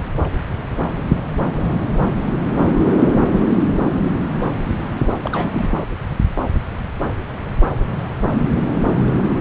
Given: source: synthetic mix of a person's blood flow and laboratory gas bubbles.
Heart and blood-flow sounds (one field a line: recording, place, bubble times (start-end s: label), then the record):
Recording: Doppler ultrasound of blood flow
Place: subclavian vein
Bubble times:
5.22-5.79 s: bubbles
From the record:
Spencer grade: 1 (occasional bubble signal discernible with the cardiac motion signal, with majority of cardiac periods free of bubbles)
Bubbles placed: anywhere in the cardiac cycle